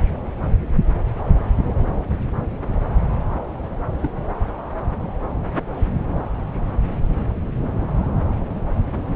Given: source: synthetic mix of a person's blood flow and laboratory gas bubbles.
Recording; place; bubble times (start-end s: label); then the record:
Doppler ultrasound of blood flow; subclavian vein
4.02-4.10 s: bubbles
From the record:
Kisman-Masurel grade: 111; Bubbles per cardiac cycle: 1 to 2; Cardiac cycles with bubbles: 1 to 10%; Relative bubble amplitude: barely perceptible (0.100 to 0.250); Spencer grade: 1 (occasional bubble signal discernible with the cardiac motion signal, with majority of cardiac periods free of bubbles); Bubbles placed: anywhere in the cardiac cycle